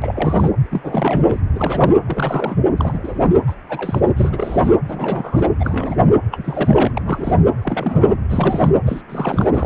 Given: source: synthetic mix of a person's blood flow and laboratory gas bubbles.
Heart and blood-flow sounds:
Doppler ultrasound of blood flow; precordium
0.02-0.51 s: bubbles
0.70-1.40 s: bubbles
1.55-1.95 s: bubbles
2.06-2.56 s: bubbles
2.77-2.99 s: bubbles
3.03-3.38 s: bubbles
3.47-3.54 s: bubbles
3.69-4.71 s: bubbles
4.88-5.49 s: bubbles
5.59-5.96 s: bubbles
6.31-6.91 s: bubbles
6.96-7.32 s: bubbles
7.62-8.13 s: bubbles
8.29-8.69 s: bubbles
8.84-9.02 s: bubbles
9.09-9.50 s: bubbles
9.54-9.66 s: bubbles
From the record:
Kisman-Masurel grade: 342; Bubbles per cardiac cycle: rolling drumbeat, 9 or more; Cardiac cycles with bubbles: 100%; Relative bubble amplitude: moderate (0.250 to 0.450); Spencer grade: 3 (all of the cardiac periods contain showers or single bubble signals, but not dominating or overriding the cardiac motion signals); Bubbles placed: anywhere in the cardiac cycle

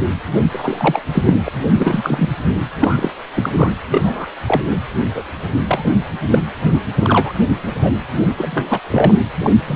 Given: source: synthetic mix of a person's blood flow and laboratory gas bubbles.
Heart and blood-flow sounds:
Doppler ultrasound of blood flow; precordium
0.51-1.01 s: bubbles
1.12-1.33 s: bubbles
1.45-1.51 s: bubbles
1.75-2.32 s: bubbles
2.79-3.10 s: bubbles
3.35-3.72 s: bubbles
3.89-4.27 s: bubbles
4.48-4.79 s: bubbles
5.15-5.24 s: bubbles
5.67-5.97 s: bubbles
6.30-6.38 s: bubbles
6.71-6.80 s: bubbles
6.99-7.33 s: bubbles
7.66-7.75 s: bubbles
7.83-7.91 s: bubbles
8.38-8.80 s: bubbles
8.91-9.13 s: bubbles
9.40-9.56 s: bubbles
9.66-9.76 s: bubbles
From the record:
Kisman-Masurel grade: 243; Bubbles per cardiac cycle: several, 3 to 8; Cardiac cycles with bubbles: 100%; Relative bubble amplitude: loud (0.450 to 0.775); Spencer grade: 3 (all of the cardiac periods contain showers or single bubble signals, but not dominating or overriding the cardiac motion signals); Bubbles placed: anywhere in the cardiac cycle

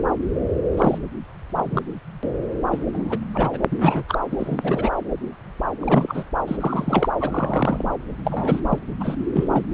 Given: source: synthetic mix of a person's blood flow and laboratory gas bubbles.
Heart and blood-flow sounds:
Doppler ultrasound of blood flow; subclavian vein
0.77-0.98 s: bubbles
1.54-1.82 s: bubbles
2.71-2.79 s: bubbles
2.93-3.19 s: bubbles
3.33-3.58 s: bubbles
3.71-3.77 s: bubbles
3.79-4.03 s: bubbles
4.08-4.18 s: bubbles
4.31-4.90 s: bubbles
5.82-6.25 s: bubbles
6.47-6.57 s: bubbles
6.60-7.08 s: bubbles
7.20-7.84 s: bubbles
8.24-8.60 s: bubbles
8.69-8.79 s: bubbles
9.00-9.16 s: bubbles
9.34-9.64 s: bubbles
From the record:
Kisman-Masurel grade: 232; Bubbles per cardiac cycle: several, 3 to 8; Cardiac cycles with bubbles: 50 to 99%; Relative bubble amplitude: moderate (0.250 to 0.450); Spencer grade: 3 (all of the cardiac periods contain showers or single bubble signals, but not dominating or overriding the cardiac motion signals); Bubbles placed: anywhere in the cardiac cycle

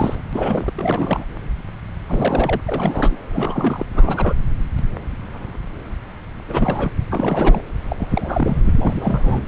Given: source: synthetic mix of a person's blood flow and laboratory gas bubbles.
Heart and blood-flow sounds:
Doppler ultrasound of blood flow; subclavian vein
0.00-0.22 s: bubbles
0.33-0.72 s: bubbles
0.75-1.24 s: bubbles
2.07-2.60 s: bubbles
2.67-3.17 s: bubbles
3.29-3.85 s: bubbles
3.94-4.33 s: bubbles
6.49-6.92 s: bubbles
7.11-7.61 s: bubbles
7.88-8.60 s: bubbles
8.64-9.43 s: bubbles
From the record:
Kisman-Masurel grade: 332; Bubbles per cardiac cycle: rolling drumbeat, 9 or more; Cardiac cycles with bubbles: 50 to 99%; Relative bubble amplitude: moderate (0.250 to 0.450); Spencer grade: 3 (all of the cardiac periods contain showers or single bubble signals, but not dominating or overriding the cardiac motion signals); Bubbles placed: anywhere in the cardiac cycle

